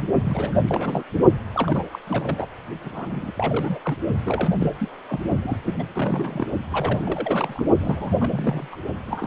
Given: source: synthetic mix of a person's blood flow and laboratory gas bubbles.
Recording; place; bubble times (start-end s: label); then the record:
Doppler ultrasound of blood flow; precordium
0.00-0.04 s: bubbles
0.24-0.61 s: bubbles
0.67-1.04 s: bubbles
1.54-1.83 s: bubbles
1.92-1.99 s: bubbles
2.07-2.46 s: bubbles
2.83-3.79 s: bubbles
3.85-3.95 s: bubbles
4.25-4.57 s: bubbles
4.60-4.72 s: bubbles
4.79-4.91 s: bubbles
5.08-5.20 s: bubbles
5.42-5.57 s: bubbles
5.65-5.74 s: bubbles
5.79-5.83 s: bubbles
5.94-6.46 s: bubbles
6.70-7.65 s: bubbles
7.81-8.68 s: bubbles
8.71-8.76 s: bubbles
9.06-9.27 s: bubbles
From the record:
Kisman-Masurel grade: 332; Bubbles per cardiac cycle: rolling drumbeat, 9 or more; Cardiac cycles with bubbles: 50 to 99%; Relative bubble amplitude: moderate (0.250 to 0.450); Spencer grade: 3 (all of the cardiac periods contain showers or single bubble signals, but not dominating or overriding the cardiac motion signals); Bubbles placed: only in the low amplitude regions of the cardiac cycle